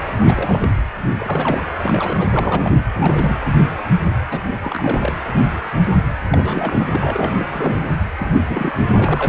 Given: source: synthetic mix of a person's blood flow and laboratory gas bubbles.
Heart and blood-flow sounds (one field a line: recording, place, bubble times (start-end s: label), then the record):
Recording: Doppler ultrasound of blood flow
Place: precordium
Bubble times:
0.21-0.70 s: bubbles
1.19-1.66 s: bubbles
1.79-2.81 s: bubbles
2.94-3.38 s: bubbles
3.44-3.52 s: bubbles
4.31-4.42 s: bubbles
4.61-5.12 s: bubbles
6.29-6.88 s: bubbles
6.92-7.47 s: bubbles
7.52-7.89 s: bubbles
8.18-8.30 s: bubbles
8.48-8.73 s: bubbles
8.86-8.89 s: bubbles
8.93-9.28 s: bubbles
From the record:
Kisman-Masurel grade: 332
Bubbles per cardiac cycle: rolling drumbeat, 9 or more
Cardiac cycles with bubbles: 50 to 99%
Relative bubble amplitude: moderate (0.250 to 0.450)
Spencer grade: 3 (all of the cardiac periods contain showers or single bubble signals, but not dominating or overriding the cardiac motion signals)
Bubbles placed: anywhere in the cardiac cycle